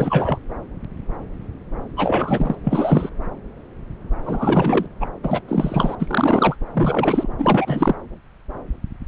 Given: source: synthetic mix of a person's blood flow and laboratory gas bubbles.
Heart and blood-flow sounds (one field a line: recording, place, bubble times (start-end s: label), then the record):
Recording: Doppler ultrasound of blood flow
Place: subclavian vein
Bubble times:
0.00-0.38 s: bubbles
1.97-2.55 s: bubbles
2.63-3.09 s: bubbles
4.25-4.86 s: bubbles
5.00-5.06 s: bubbles
5.23-5.40 s: bubbles
5.47-5.95 s: bubbles
5.99-6.55 s: bubbles
6.73-7.29 s: bubbles
7.38-7.95 s: bubbles
From the record:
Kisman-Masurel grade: 333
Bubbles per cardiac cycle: rolling drumbeat, 9 or more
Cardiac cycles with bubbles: 50 to 99%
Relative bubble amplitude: loud (0.450 to 0.775)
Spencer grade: 3 (all of the cardiac periods contain showers or single bubble signals, but not dominating or overriding the cardiac motion signals)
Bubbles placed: anywhere in the cardiac cycle